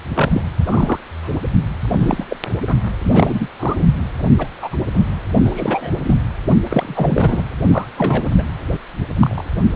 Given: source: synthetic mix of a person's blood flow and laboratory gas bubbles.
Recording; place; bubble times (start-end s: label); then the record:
Doppler ultrasound of blood flow; precordium
0.14-0.42 s: bubbles
0.65-1.00 s: bubbles
1.23-1.40 s: bubbles
1.83-2.25 s: bubbles
2.30-2.36 s: bubbles
2.67-2.74 s: bubbles
2.99-3.48 s: bubbles
3.59-3.76 s: bubbles
3.79-3.85 s: bubbles
4.39-4.50 s: bubbles
4.58-4.76 s: bubbles
4.94-5.07 s: bubbles
5.39-5.91 s: bubbles
6.04-6.16 s: bubbles
6.70-7.44 s: bubbles
7.71-7.86 s: bubbles
7.97-8.29 s: bubbles
8.38-8.42 s: bubbles
9.21-9.43 s: bubbles
From the record:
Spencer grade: 3 (all of the cardiac periods contain showers or single bubble signals, but not dominating or overriding the cardiac motion signals); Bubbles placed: anywhere in the cardiac cycle